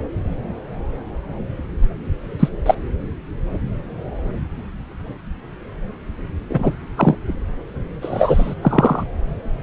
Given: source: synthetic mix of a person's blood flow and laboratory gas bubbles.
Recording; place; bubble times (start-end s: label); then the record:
Doppler ultrasound of blood flow; subclavian vein
2.39-2.49 s: bubbles
2.66-2.75 s: bubbles
6.49-6.72 s: bubbles
6.96-7.15 s: bubbles
8.02-8.54 s: bubbles
8.62-9.04 s: bubbles
From the record:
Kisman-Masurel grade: 123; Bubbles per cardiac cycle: 1 to 2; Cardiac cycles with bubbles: 10 to 50%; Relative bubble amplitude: loud (0.450 to 0.775); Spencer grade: 2 (many but less than half of the cardiac periods contain bubble signals, singularly or in groups); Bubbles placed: anywhere in the cardiac cycle